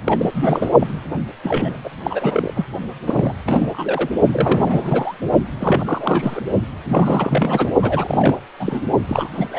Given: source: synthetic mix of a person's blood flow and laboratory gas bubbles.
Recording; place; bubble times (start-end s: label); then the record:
Doppler ultrasound of blood flow; precordium
0.04-0.70 s: bubbles
0.79-0.87 s: bubbles
1.43-1.80 s: bubbles
1.84-1.90 s: bubbles
2.04-2.65 s: bubbles
3.06-3.32 s: bubbles
3.45-4.09 s: bubbles
4.31-5.14 s: bubbles
5.59-6.40 s: bubbles
6.89-7.71 s: bubbles
7.82-8.42 s: bubbles
8.60-8.86 s: bubbles
9.08-9.29 s: bubbles
9.38-9.59 s: bubbles
From the record:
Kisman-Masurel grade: 342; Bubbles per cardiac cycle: rolling drumbeat, 9 or more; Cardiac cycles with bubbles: 100%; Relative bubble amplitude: moderate (0.250 to 0.450); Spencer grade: 3 (all of the cardiac periods contain showers or single bubble signals, but not dominating or overriding the cardiac motion signals); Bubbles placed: only in the low amplitude regions of the cardiac cycle